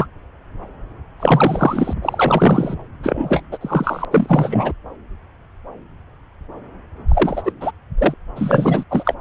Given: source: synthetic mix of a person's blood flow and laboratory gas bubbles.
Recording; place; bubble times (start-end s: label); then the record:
Doppler ultrasound of blood flow; subclavian vein
0.00-0.05 s: bubbles
1.19-1.94 s: bubbles
2.02-2.75 s: bubbles
3.03-3.41 s: bubbles
3.51-3.57 s: bubbles
3.60-4.05 s: bubbles
4.11-4.72 s: bubbles
7.08-7.52 s: bubbles
7.60-7.72 s: bubbles
7.98-8.14 s: bubbles
8.36-8.84 s: bubbles
8.90-9.14 s: bubbles
From the record:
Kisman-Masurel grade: 333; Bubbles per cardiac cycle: rolling drumbeat, 9 or more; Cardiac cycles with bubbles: 50 to 99%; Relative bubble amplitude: loud (0.450 to 0.775); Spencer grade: 3 (all of the cardiac periods contain showers or single bubble signals, but not dominating or overriding the cardiac motion signals); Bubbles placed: anywhere in the cardiac cycle